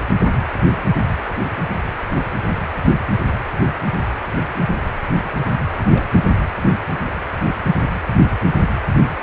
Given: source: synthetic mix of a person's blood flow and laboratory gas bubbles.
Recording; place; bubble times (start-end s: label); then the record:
Doppler ultrasound of blood flow; precordium
5.78-5.82 s: bubbles
5.91-6.04 s: bubbles
From the record:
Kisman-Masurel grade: 111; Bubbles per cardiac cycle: 1 to 2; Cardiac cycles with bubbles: 1 to 10%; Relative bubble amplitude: barely perceptible (0.100 to 0.250); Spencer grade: 1 (occasional bubble signal discernible with the cardiac motion signal, with majority of cardiac periods free of bubbles); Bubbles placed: anywhere in the cardiac cycle